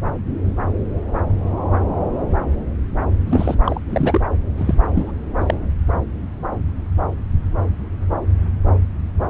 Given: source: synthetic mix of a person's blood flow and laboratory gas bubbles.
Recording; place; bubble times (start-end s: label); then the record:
Doppler ultrasound of blood flow; subclavian vein
3.26-3.54 s: bubbles
3.64-3.81 s: bubbles
3.89-4.21 s: bubbles
4.57-4.75 s: bubbles
4.95-5.11 s: bubbles
5.40-5.54 s: bubbles
From the record:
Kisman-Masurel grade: 223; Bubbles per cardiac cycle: several, 3 to 8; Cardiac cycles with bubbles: 10 to 50%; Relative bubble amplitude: loud (0.450 to 0.775); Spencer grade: 2 (many but less than half of the cardiac periods contain bubble signals, singularly or in groups); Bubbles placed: anywhere in the cardiac cycle